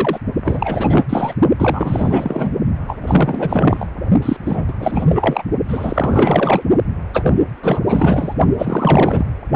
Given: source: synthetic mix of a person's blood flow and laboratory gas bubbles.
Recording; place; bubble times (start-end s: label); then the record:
Doppler ultrasound of blood flow; precordium
0.00-0.20 s: bubbles
0.35-1.05 s: bubbles
1.09-1.33 s: bubbles
1.58-2.51 s: bubbles
2.87-2.96 s: bubbles
3.01-3.87 s: bubbles
4.22-4.36 s: bubbles
4.46-4.73 s: bubbles
4.78-5.05 s: bubbles
5.08-5.43 s: bubbles
5.68-6.62 s: bubbles
7.13-7.44 s: bubbles
7.62-7.81 s: bubbles
7.88-8.35 s: bubbles
8.58-9.26 s: bubbles
From the record:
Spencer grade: 4 (maximum detectable bubble signal sounding continuously throughout systole and diastole of every cardiac period, and overriding the amplitude of the normal cardiac signals); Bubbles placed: only in the low amplitude regions of the cardiac cycle